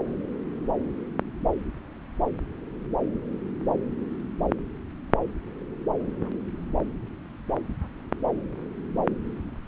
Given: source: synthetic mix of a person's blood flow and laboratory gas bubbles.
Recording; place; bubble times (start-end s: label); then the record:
Doppler ultrasound of blood flow; subclavian vein
no bubbles
From the record:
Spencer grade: 0 (complete lack of bubble signals)